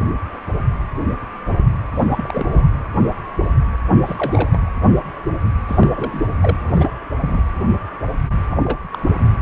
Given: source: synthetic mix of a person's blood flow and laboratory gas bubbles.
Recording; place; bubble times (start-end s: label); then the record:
Doppler ultrasound of blood flow; precordium
1.95-2.67 s: bubbles
2.72-2.79 s: bubbles
4.06-4.70 s: bubbles
5.67-5.92 s: bubbles
5.96-6.61 s: bubbles
6.64-6.91 s: bubbles
7.12-7.42 s: bubbles
8.51-8.56 s: bubbles
8.64-8.79 s: bubbles
8.93-8.98 s: bubbles
From the record:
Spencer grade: 2 (many but less than half of the cardiac periods contain bubble signals, singularly or in groups); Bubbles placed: anywhere in the cardiac cycle